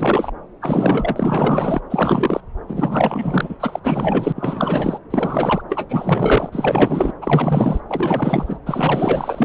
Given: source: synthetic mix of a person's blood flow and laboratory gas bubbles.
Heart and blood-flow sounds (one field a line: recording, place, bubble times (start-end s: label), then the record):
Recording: Doppler ultrasound of blood flow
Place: subclavian vein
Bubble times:
0.00-0.32 s: bubbles
0.61-1.81 s: bubbles
1.90-2.41 s: bubbles
2.67-3.56 s: bubbles
3.60-3.80 s: bubbles
3.83-4.32 s: bubbles
4.35-4.99 s: bubbles
5.10-5.62 s: bubbles
5.69-7.13 s: bubbles
7.21-7.80 s: bubbles
7.88-8.58 s: bubbles
8.66-9.45 s: bubbles
From the record:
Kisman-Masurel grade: 444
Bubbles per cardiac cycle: continuous sound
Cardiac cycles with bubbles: 100%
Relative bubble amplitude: maximal (0.775 to 0.999)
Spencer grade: 4 (maximum detectable bubble signal sounding continuously throughout systole and diastole of every cardiac period, and overriding the amplitude of the normal cardiac signals)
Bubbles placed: anywhere in the cardiac cycle